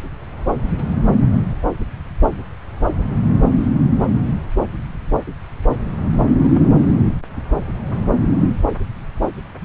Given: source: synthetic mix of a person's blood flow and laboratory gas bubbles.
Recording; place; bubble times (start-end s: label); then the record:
Doppler ultrasound of blood flow; subclavian vein
6.42-6.50 s: bubbles
6.54-6.63 s: bubbles
From the record:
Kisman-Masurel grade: 111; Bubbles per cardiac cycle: 1 to 2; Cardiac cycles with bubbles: 1 to 10%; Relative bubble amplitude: barely perceptible (0.100 to 0.250); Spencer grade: 1 (occasional bubble signal discernible with the cardiac motion signal, with majority of cardiac periods free of bubbles); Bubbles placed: anywhere in the cardiac cycle